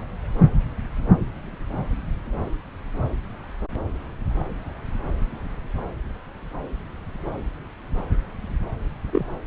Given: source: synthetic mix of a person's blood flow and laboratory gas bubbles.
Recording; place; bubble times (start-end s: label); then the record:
Doppler ultrasound of blood flow; subclavian vein
9.12-9.26 s: bubbles
From the record:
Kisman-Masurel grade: 112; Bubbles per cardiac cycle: 1 to 2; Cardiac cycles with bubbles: 1 to 10%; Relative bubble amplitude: moderate (0.250 to 0.450); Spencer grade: 1 (occasional bubble signal discernible with the cardiac motion signal, with majority of cardiac periods free of bubbles); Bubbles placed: anywhere in the cardiac cycle